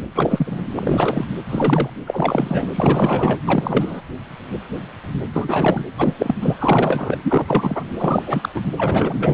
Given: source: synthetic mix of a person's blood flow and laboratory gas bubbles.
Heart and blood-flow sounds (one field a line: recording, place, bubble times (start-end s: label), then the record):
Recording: Doppler ultrasound of blood flow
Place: precordium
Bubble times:
0.14-0.70 s: bubbles
0.76-1.25 s: bubbles
1.50-1.90 s: bubbles
2.07-2.68 s: bubbles
2.74-3.38 s: bubbles
3.47-4.02 s: bubbles
5.33-5.85 s: bubbles
5.98-6.14 s: bubbles
6.18-6.35 s: bubbles
6.41-7.17 s: bubbles
7.24-7.84 s: bubbles
7.98-8.22 s: bubbles
8.26-8.49 s: bubbles
8.54-8.63 s: bubbles
8.77-9.33 s: bubbles
From the record:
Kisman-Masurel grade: 333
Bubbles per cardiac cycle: rolling drumbeat, 9 or more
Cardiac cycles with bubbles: 50 to 99%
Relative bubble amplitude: loud (0.450 to 0.775)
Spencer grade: 3 (all of the cardiac periods contain showers or single bubble signals, but not dominating or overriding the cardiac motion signals)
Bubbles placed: anywhere in the cardiac cycle